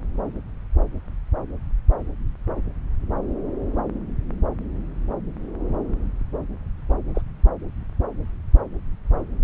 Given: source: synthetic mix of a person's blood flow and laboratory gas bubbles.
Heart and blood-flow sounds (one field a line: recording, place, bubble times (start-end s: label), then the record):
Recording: Doppler ultrasound of blood flow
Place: subclavian vein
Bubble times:
7.14-7.22 s: bubbles
From the record:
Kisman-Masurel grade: 111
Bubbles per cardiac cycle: 1 to 2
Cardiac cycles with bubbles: 1 to 10%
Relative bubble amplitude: barely perceptible (0.100 to 0.250)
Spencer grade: 1 (occasional bubble signal discernible with the cardiac motion signal, with majority of cardiac periods free of bubbles)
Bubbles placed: anywhere in the cardiac cycle